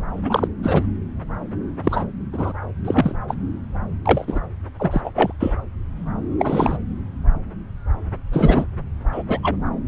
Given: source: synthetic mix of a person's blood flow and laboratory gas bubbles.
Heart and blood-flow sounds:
Doppler ultrasound of blood flow; subclavian vein
0.24-0.48 s: bubbles
0.63-0.83 s: bubbles
1.83-2.05 s: bubbles
2.32-2.53 s: bubbles
2.85-3.15 s: bubbles
3.28-3.35 s: bubbles
4.04-4.39 s: bubbles
4.79-5.01 s: bubbles
5.04-5.11 s: bubbles
5.15-5.33 s: bubbles
5.39-5.54 s: bubbles
6.39-6.77 s: bubbles
8.32-8.65 s: bubbles
9.12-9.23 s: bubbles
9.28-9.40 s: bubbles
9.43-9.56 s: bubbles
From the record:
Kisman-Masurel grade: 233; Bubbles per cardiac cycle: several, 3 to 8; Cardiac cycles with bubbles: 50 to 99%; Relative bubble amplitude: loud (0.450 to 0.775); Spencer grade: 3 (all of the cardiac periods contain showers or single bubble signals, but not dominating or overriding the cardiac motion signals); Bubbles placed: anywhere in the cardiac cycle

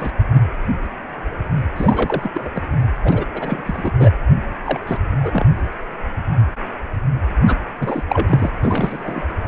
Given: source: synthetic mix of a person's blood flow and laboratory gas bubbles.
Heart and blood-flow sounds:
Doppler ultrasound of blood flow; precordium
0.00-0.13 s: bubbles
0.34-0.39 s: bubbles
1.74-2.31 s: bubbles
2.34-2.50 s: bubbles
2.55-2.62 s: bubbles
3.04-3.25 s: bubbles
3.33-3.62 s: bubbles
3.66-3.92 s: bubbles
3.99-4.11 s: bubbles
4.64-4.79 s: bubbles
4.87-5.00 s: bubbles
5.16-5.46 s: bubbles
7.47-7.57 s: bubbles
7.81-8.02 s: bubbles
8.09-8.51 s: bubbles
8.63-9.24 s: bubbles
From the record:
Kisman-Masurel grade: 232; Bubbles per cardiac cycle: several, 3 to 8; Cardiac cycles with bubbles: 50 to 99%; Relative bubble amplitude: moderate (0.250 to 0.450); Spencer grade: 3 (all of the cardiac periods contain showers or single bubble signals, but not dominating or overriding the cardiac motion signals); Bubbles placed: anywhere in the cardiac cycle

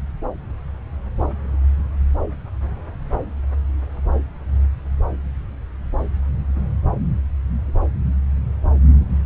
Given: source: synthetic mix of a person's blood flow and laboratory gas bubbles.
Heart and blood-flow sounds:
Doppler ultrasound of blood flow; subclavian vein
no bubbles
From the record:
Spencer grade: 0 (complete lack of bubble signals)

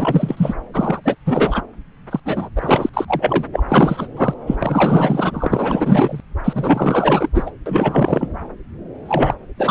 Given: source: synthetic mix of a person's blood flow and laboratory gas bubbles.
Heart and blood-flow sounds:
Doppler ultrasound of blood flow; subclavian vein
0.00-0.54 s: bubbles
0.74-1.01 s: bubbles
1.04-1.16 s: bubbles
1.26-1.62 s: bubbles
2.10-2.20 s: bubbles
2.25-2.49 s: bubbles
2.55-2.90 s: bubbles
2.93-3.05 s: bubbles
3.07-3.44 s: bubbles
3.52-3.63 s: bubbles
3.68-4.07 s: bubbles
4.17-4.34 s: bubbles
4.46-4.56 s: bubbles
4.59-6.21 s: bubbles
6.44-7.29 s: bubbles
7.34-7.51 s: bubbles
7.66-8.32 s: bubbles
9.06-9.34 s: bubbles
9.58-9.71 s: bubbles
From the record:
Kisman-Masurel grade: 444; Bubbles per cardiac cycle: continuous sound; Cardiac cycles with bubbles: 100%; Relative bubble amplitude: maximal (0.775 to 0.999); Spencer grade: 4 (maximum detectable bubble signal sounding continuously throughout systole and diastole of every cardiac period, and overriding the amplitude of the normal cardiac signals); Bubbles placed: anywhere in the cardiac cycle

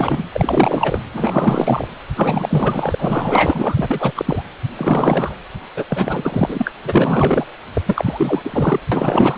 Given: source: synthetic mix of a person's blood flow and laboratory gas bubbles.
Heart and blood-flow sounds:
Doppler ultrasound of blood flow; precordium
0.00-0.29 s: bubbles
0.32-1.01 s: bubbles
1.12-1.88 s: bubbles
2.16-2.96 s: bubbles
2.98-4.13 s: bubbles
4.16-4.42 s: bubbles
4.75-5.35 s: bubbles
5.76-5.84 s: bubbles
5.88-6.72 s: bubbles
6.83-7.46 s: bubbles
7.73-7.81 s: bubbles
7.86-8.80 s: bubbles
8.91-9.38 s: bubbles
From the record:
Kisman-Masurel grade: 444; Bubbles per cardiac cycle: continuous sound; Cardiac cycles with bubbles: 100%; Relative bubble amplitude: maximal (0.775 to 0.999); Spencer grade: 4 (maximum detectable bubble signal sounding continuously throughout systole and diastole of every cardiac period, and overriding the amplitude of the normal cardiac signals); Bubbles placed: anywhere in the cardiac cycle

